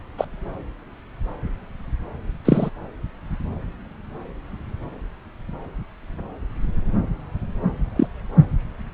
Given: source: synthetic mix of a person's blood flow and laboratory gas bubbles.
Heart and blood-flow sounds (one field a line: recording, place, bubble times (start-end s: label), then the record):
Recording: Doppler ultrasound of blood flow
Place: subclavian vein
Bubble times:
0.18-0.25 s: bubbles
2.45-2.70 s: bubbles
7.96-8.07 s: bubbles
From the record:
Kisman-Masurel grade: 123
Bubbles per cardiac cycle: 1 to 2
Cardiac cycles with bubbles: 10 to 50%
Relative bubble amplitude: loud (0.450 to 0.775)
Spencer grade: 2 (many but less than half of the cardiac periods contain bubble signals, singularly or in groups)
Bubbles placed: anywhere in the cardiac cycle